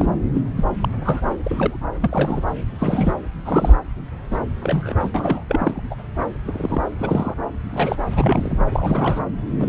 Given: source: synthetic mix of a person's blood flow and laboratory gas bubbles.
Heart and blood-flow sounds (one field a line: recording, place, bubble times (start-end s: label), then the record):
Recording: Doppler ultrasound of blood flow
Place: subclavian vein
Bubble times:
0.00-0.06 s: bubbles
0.34-0.42 s: bubbles
0.57-0.64 s: bubbles
0.81-0.89 s: bubbles
1.05-1.21 s: bubbles
1.45-1.77 s: bubbles
2.00-2.46 s: bubbles
2.79-3.14 s: bubbles
3.45-3.76 s: bubbles
4.31-4.41 s: bubbles
4.61-4.95 s: bubbles
5.00-5.10 s: bubbles
5.14-5.42 s: bubbles
5.49-5.81 s: bubbles
5.90-5.95 s: bubbles
6.45-6.81 s: bubbles
6.83-6.90 s: bubbles
6.99-7.35 s: bubbles
7.70-7.97 s: bubbles
8.10-8.63 s: bubbles
8.70-9.24 s: bubbles
9.59-9.68 s: bubbles
From the record:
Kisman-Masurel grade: 232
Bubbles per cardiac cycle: several, 3 to 8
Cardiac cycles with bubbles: 50 to 99%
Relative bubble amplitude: moderate (0.250 to 0.450)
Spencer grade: 3 (all of the cardiac periods contain showers or single bubble signals, but not dominating or overriding the cardiac motion signals)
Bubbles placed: anywhere in the cardiac cycle